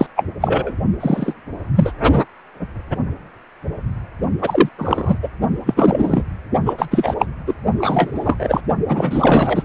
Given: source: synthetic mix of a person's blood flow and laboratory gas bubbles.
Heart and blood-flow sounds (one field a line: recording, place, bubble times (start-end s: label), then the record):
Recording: Doppler ultrasound of blood flow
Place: precordium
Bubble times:
0.00-0.07 s: bubbles
0.16-0.24 s: bubbles
0.40-0.74 s: bubbles
1.00-1.35 s: bubbles
1.74-1.92 s: bubbles
4.42-4.69 s: bubbles
4.79-5.18 s: bubbles
5.22-5.29 s: bubbles
5.66-6.22 s: bubbles
6.66-6.74 s: bubbles
6.78-6.88 s: bubbles
6.91-7.14 s: bubbles
7.19-7.25 s: bubbles
7.46-7.54 s: bubbles
7.78-8.11 s: bubbles
8.15-8.61 s: bubbles
8.88-9.63 s: bubbles
From the record:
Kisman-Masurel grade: 233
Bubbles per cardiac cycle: several, 3 to 8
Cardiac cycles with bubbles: 50 to 99%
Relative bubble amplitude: loud (0.450 to 0.775)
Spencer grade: 3 (all of the cardiac periods contain showers or single bubble signals, but not dominating or overriding the cardiac motion signals)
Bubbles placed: only in the low amplitude regions of the cardiac cycle